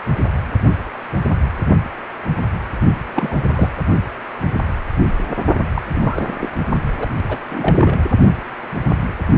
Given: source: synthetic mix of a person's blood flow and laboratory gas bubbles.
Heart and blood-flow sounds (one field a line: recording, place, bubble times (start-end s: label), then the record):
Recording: Doppler ultrasound of blood flow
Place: precordium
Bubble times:
2.89-2.94 s: bubbles
3.06-3.69 s: bubbles
5.75-5.81 s: bubbles
5.94-6.35 s: bubbles
6.40-6.49 s: bubbles
6.97-7.10 s: bubbles
7.27-7.37 s: bubbles
7.49-7.99 s: bubbles
From the record:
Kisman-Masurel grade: 222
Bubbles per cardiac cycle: several, 3 to 8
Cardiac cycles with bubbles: 10 to 50%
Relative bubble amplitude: moderate (0.250 to 0.450)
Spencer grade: 2 (many but less than half of the cardiac periods contain bubble signals, singularly or in groups)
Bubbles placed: only in the low amplitude regions of the cardiac cycle